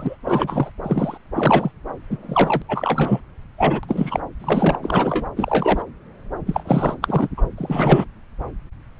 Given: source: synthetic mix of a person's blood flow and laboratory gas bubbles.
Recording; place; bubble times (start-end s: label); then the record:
Doppler ultrasound of blood flow; subclavian vein
0.00-0.17 s: bubbles
0.25-0.70 s: bubbles
0.83-1.18 s: bubbles
1.35-1.71 s: bubbles
2.10-2.18 s: bubbles
2.23-2.62 s: bubbles
2.68-3.21 s: bubbles
3.57-3.81 s: bubbles
3.83-4.20 s: bubbles
4.39-4.78 s: bubbles
4.82-5.30 s: bubbles
5.36-5.83 s: bubbles
6.46-6.96 s: bubbles
7.02-7.29 s: bubbles
7.37-7.43 s: bubbles
7.57-8.04 s: bubbles
From the record:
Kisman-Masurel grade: 233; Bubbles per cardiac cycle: several, 3 to 8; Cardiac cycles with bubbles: 50 to 99%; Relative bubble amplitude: loud (0.450 to 0.775); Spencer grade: 3 (all of the cardiac periods contain showers or single bubble signals, but not dominating or overriding the cardiac motion signals); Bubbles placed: anywhere in the cardiac cycle